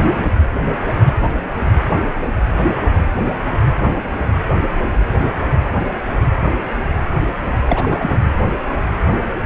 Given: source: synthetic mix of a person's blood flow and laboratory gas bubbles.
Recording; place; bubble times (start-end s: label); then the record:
Doppler ultrasound of blood flow; precordium
7.68-8.21 s: bubbles
From the record:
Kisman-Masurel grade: 212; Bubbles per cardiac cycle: several, 3 to 8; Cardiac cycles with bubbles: 1 to 10%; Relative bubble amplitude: moderate (0.250 to 0.450); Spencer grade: 1 (occasional bubble signal discernible with the cardiac motion signal, with majority of cardiac periods free of bubbles); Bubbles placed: anywhere in the cardiac cycle